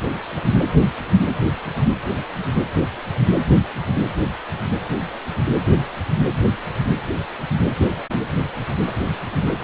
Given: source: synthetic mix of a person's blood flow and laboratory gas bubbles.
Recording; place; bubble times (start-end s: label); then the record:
Doppler ultrasound of blood flow; precordium
no bubbles
From the record:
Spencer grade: 0 (complete lack of bubble signals)